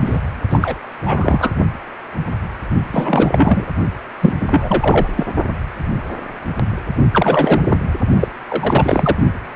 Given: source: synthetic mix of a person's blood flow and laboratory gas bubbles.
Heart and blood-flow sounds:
Doppler ultrasound of blood flow; precordium
0.00-0.21 s: bubbles
0.49-0.74 s: bubbles
1.05-1.51 s: bubbles
2.92-3.67 s: bubbles
4.21-4.33 s: bubbles
4.41-4.46 s: bubbles
4.49-5.08 s: bubbles
5.16-5.25 s: bubbles
7.12-7.62 s: bubbles
7.70-7.81 s: bubbles
8.19-8.28 s: bubbles
8.48-9.16 s: bubbles
From the record:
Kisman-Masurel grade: 333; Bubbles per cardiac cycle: rolling drumbeat, 9 or more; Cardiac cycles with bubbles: 50 to 99%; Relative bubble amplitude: loud (0.450 to 0.775); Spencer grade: 3 (all of the cardiac periods contain showers or single bubble signals, but not dominating or overriding the cardiac motion signals); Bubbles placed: only in the low amplitude regions of the cardiac cycle

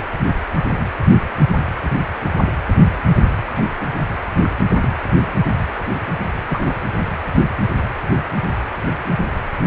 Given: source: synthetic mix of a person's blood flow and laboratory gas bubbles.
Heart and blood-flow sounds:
Doppler ultrasound of blood flow; precordium
3.56-3.63 s: bubbles
3.81-3.84 s: bubbles
4.43-4.49 s: bubbles
4.81-4.88 s: bubbles
5.12-5.22 s: bubbles
6.49-6.75 s: bubbles
From the record:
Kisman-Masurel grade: 121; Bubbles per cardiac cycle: 1 to 2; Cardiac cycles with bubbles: 10 to 50%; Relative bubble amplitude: barely perceptible (0.100 to 0.250); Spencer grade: 2 (many but less than half of the cardiac periods contain bubble signals, singularly or in groups); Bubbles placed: anywhere in the cardiac cycle

